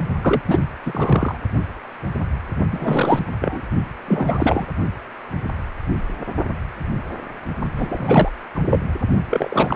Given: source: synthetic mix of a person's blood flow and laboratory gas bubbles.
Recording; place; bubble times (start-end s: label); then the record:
Doppler ultrasound of blood flow; precordium
0.21-0.42 s: bubbles
0.47-0.59 s: bubbles
0.85-1.38 s: bubbles
2.71-3.25 s: bubbles
3.41-3.61 s: bubbles
4.06-4.66 s: bubbles
7.77-8.31 s: bubbles
8.55-8.60 s: bubbles
8.69-8.80 s: bubbles
9.30-9.76 s: bubbles
From the record:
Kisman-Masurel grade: 333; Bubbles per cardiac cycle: rolling drumbeat, 9 or more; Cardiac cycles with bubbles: 50 to 99%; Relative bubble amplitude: loud (0.450 to 0.775); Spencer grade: 3 (all of the cardiac periods contain showers or single bubble signals, but not dominating or overriding the cardiac motion signals); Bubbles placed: only in the low amplitude regions of the cardiac cycle